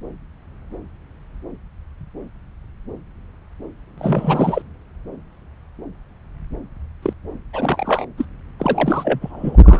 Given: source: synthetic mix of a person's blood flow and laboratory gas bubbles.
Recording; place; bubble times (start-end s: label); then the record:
Doppler ultrasound of blood flow; subclavian vein
3.98-4.62 s: bubbles
7.02-7.13 s: bubbles
7.53-8.06 s: bubbles
8.17-8.25 s: bubbles
8.59-9.61 s: bubbles
9.63-9.80 s: bubbles
From the record:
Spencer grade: 3 (all of the cardiac periods contain showers or single bubble signals, but not dominating or overriding the cardiac motion signals); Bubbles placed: anywhere in the cardiac cycle